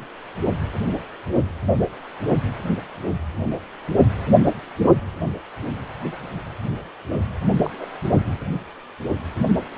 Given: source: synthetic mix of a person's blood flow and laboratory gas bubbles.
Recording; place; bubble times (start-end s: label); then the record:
Doppler ultrasound of blood flow; precordium
7.63-7.85 s: bubbles
From the record:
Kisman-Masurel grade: 112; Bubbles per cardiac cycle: 1 to 2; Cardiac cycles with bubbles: 1 to 10%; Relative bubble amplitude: moderate (0.250 to 0.450); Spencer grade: 1 (occasional bubble signal discernible with the cardiac motion signal, with majority of cardiac periods free of bubbles); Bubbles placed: only in the low amplitude regions of the cardiac cycle